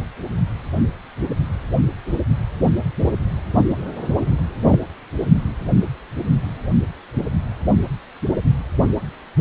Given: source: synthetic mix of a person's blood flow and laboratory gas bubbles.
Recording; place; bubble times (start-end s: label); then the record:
Doppler ultrasound of blood flow; precordium
4.67-4.79 s: bubbles
From the record:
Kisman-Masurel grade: 113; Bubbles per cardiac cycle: 1 to 2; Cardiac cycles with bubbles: 1 to 10%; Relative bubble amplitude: loud (0.450 to 0.775); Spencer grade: 1 (occasional bubble signal discernible with the cardiac motion signal, with majority of cardiac periods free of bubbles); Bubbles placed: anywhere in the cardiac cycle